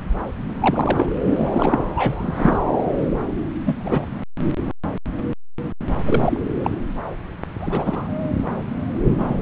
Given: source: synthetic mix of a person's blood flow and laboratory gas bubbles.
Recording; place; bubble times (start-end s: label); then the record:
Doppler ultrasound of blood flow; subclavian vein
0.49-0.54 s: bubbles
0.60-1.12 s: bubbles
1.24-1.79 s: bubbles
1.96-2.57 s: bubbles
2.98-3.09 s: bubbles
3.66-3.75 s: bubbles
3.80-4.06 s: bubbles
6.05-6.40 s: bubbles
6.64-6.70 s: bubbles
7.61-8.07 s: bubbles
9.18-9.42 s: bubbles
From the record:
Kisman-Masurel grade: 232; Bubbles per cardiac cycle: several, 3 to 8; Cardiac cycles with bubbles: 50 to 99%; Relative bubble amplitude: moderate (0.250 to 0.450); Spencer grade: 3 (all of the cardiac periods contain showers or single bubble signals, but not dominating or overriding the cardiac motion signals); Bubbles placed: anywhere in the cardiac cycle